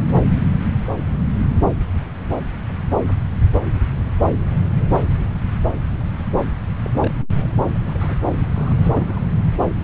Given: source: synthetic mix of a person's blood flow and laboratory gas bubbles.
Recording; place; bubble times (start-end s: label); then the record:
Doppler ultrasound of blood flow; subclavian vein
6.83-6.91 s: bubbles
6.94-7.26 s: bubbles
7.33-7.78 s: bubbles
7.87-8.17 s: bubbles
8.54-9.04 s: bubbles
9.08-9.19 s: bubbles
From the record:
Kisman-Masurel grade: 221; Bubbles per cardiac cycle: several, 3 to 8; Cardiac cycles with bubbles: 10 to 50%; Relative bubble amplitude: barely perceptible (0.100 to 0.250); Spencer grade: 2 (many but less than half of the cardiac periods contain bubble signals, singularly or in groups); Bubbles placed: anywhere in the cardiac cycle